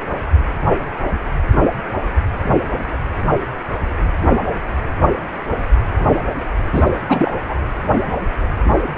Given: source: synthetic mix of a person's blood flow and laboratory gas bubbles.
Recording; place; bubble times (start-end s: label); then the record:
Doppler ultrasound of blood flow; precordium
6.72-6.91 s: bubbles
7.08-7.34 s: bubbles
7.49-7.56 s: bubbles
From the record:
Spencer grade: 2 (many but less than half of the cardiac periods contain bubble signals, singularly or in groups); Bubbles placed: anywhere in the cardiac cycle